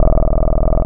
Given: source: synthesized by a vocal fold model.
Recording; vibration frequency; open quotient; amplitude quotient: sustained vowel; 20 Hz; 0.5; 1